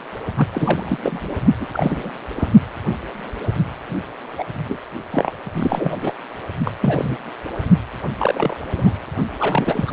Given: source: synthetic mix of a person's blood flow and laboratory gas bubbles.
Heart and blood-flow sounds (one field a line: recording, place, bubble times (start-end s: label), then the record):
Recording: Doppler ultrasound of blood flow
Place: precordium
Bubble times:
0.38-0.48 s: bubbles
0.53-0.98 s: bubbles
1.03-1.35 s: bubbles
1.59-1.67 s: bubbles
1.72-2.10 s: bubbles
2.35-2.48 s: bubbles
4.37-4.45 s: bubbles
4.69-4.78 s: bubbles
5.11-5.32 s: bubbles
5.54-6.14 s: bubbles
6.65-6.71 s: bubbles
6.81-7.17 s: bubbles
8.18-8.60 s: bubbles
8.76-8.93 s: bubbles
9.39-9.92 s: bubbles
From the record:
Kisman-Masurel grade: 232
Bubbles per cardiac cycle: several, 3 to 8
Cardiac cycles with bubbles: 50 to 99%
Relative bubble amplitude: moderate (0.250 to 0.450)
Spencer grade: 3 (all of the cardiac periods contain showers or single bubble signals, but not dominating or overriding the cardiac motion signals)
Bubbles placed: anywhere in the cardiac cycle